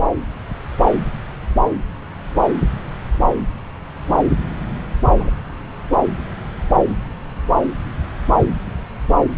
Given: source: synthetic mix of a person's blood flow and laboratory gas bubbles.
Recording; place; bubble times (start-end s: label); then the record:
Doppler ultrasound of blood flow; subclavian vein
5.19-5.31 s: bubbles
From the record:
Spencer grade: 1 (occasional bubble signal discernible with the cardiac motion signal, with majority of cardiac periods free of bubbles); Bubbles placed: anywhere in the cardiac cycle